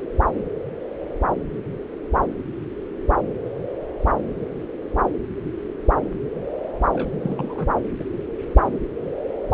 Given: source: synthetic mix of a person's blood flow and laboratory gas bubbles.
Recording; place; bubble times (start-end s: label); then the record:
Doppler ultrasound of blood flow; subclavian vein
6.93-7.11 s: bubbles
7.21-7.67 s: bubbles
8.00-8.04 s: bubbles
From the record:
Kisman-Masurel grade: 211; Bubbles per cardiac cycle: several, 3 to 8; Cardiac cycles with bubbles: 1 to 10%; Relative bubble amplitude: barely perceptible (0.100 to 0.250); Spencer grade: 1 (occasional bubble signal discernible with the cardiac motion signal, with majority of cardiac periods free of bubbles); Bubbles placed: anywhere in the cardiac cycle